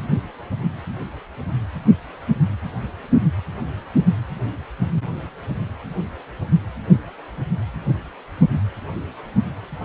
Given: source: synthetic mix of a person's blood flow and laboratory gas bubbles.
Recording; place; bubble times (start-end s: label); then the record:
Doppler ultrasound of blood flow; precordium
no bubbles
From the record:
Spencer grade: 0 (complete lack of bubble signals)